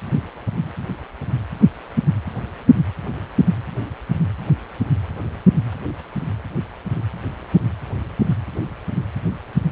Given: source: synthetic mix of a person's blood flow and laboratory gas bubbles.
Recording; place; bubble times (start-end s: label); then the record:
Doppler ultrasound of blood flow; precordium
no bubbles
From the record:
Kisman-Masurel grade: 000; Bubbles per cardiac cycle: 0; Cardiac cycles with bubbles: 0%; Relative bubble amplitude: no bubbles discernible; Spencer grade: 0 (complete lack of bubble signals)